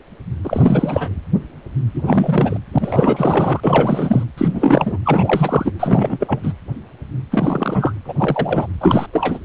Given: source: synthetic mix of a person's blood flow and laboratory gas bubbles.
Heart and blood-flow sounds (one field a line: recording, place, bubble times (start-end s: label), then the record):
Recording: Doppler ultrasound of blood flow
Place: precordium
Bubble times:
0.44-1.08 s: bubbles
1.94-2.02 s: bubbles
2.05-2.58 s: bubbles
2.73-3.60 s: bubbles
3.63-4.24 s: bubbles
4.38-4.98 s: bubbles
5.04-5.72 s: bubbles
5.79-6.40 s: bubbles
6.43-6.53 s: bubbles
7.30-7.93 s: bubbles
8.05-8.14 s: bubbles
8.18-8.67 s: bubbles
8.80-9.06 s: bubbles
9.12-9.39 s: bubbles
From the record:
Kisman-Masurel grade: 333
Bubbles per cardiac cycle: rolling drumbeat, 9 or more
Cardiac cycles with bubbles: 50 to 99%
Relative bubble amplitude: loud (0.450 to 0.775)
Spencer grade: 3 (all of the cardiac periods contain showers or single bubble signals, but not dominating or overriding the cardiac motion signals)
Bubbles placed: anywhere in the cardiac cycle